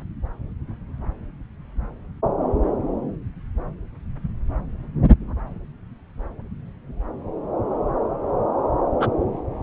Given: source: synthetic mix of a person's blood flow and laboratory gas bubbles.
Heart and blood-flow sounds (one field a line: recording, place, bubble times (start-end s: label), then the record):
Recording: Doppler ultrasound of blood flow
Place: subclavian vein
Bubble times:
8.99-9.06 s: bubbles
From the record:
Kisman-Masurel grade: 113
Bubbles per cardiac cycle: 1 to 2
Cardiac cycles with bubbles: 1 to 10%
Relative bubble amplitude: loud (0.450 to 0.775)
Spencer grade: 1 (occasional bubble signal discernible with the cardiac motion signal, with majority of cardiac periods free of bubbles)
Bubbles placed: anywhere in the cardiac cycle